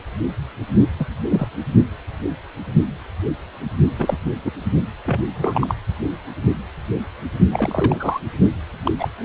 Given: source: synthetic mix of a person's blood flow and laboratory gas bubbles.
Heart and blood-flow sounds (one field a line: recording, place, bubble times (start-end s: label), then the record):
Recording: Doppler ultrasound of blood flow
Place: precordium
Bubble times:
0.98-1.05 s: bubbles
1.29-1.48 s: bubbles
3.98-4.17 s: bubbles
4.25-4.32 s: bubbles
4.45-4.50 s: bubbles
5.05-5.21 s: bubbles
5.35-5.75 s: bubbles
7.52-8.19 s: bubbles
8.86-8.91 s: bubbles
8.98-9.08 s: bubbles
From the record:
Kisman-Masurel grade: 232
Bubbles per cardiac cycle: several, 3 to 8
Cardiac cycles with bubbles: 50 to 99%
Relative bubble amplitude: moderate (0.250 to 0.450)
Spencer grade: 3 (all of the cardiac periods contain showers or single bubble signals, but not dominating or overriding the cardiac motion signals)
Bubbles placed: only in the low amplitude regions of the cardiac cycle